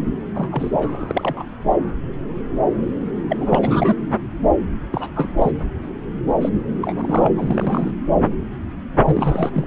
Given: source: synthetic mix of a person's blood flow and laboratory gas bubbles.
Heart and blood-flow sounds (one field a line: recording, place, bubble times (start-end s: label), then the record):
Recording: Doppler ultrasound of blood flow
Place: subclavian vein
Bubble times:
0.34-1.44 s: bubbles
3.29-3.37 s: bubbles
3.40-3.96 s: bubbles
4.92-5.12 s: bubbles
5.16-5.51 s: bubbles
6.29-6.34 s: bubbles
6.41-6.49 s: bubbles
6.82-7.28 s: bubbles
7.35-7.91 s: bubbles
9.04-9.67 s: bubbles
From the record:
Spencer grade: 3 (all of the cardiac periods contain showers or single bubble signals, but not dominating or overriding the cardiac motion signals)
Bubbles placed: anywhere in the cardiac cycle